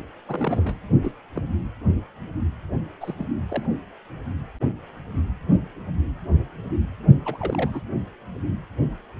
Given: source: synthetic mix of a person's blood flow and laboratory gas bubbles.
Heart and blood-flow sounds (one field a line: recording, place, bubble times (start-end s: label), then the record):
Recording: Doppler ultrasound of blood flow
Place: precordium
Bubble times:
0.28-0.78 s: bubbles
1.01-1.12 s: bubbles
1.35-1.42 s: bubbles
3.00-3.14 s: bubbles
3.18-3.27 s: bubbles
3.49-3.66 s: bubbles
7.25-7.82 s: bubbles
From the record:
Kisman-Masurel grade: 221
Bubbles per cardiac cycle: several, 3 to 8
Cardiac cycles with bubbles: 10 to 50%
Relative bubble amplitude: barely perceptible (0.100 to 0.250)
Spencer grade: 2 (many but less than half of the cardiac periods contain bubble signals, singularly or in groups)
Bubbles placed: only in the low amplitude regions of the cardiac cycle